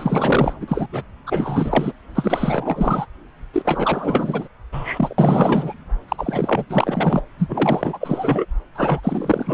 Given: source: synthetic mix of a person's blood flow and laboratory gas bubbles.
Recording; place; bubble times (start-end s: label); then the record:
Doppler ultrasound of blood flow; subclavian vein
0.00-0.54 s: bubbles
0.60-0.88 s: bubbles
0.92-1.03 s: bubbles
1.26-1.93 s: bubbles
2.15-3.06 s: bubbles
3.53-4.48 s: bubbles
4.72-5.16 s: bubbles
5.18-5.78 s: bubbles
6.08-6.65 s: bubbles
6.69-7.22 s: bubbles
7.39-8.46 s: bubbles
8.74-9.00 s: bubbles
9.03-9.54 s: bubbles
From the record:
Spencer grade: 4 (maximum detectable bubble signal sounding continuously throughout systole and diastole of every cardiac period, and overriding the amplitude of the normal cardiac signals); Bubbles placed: anywhere in the cardiac cycle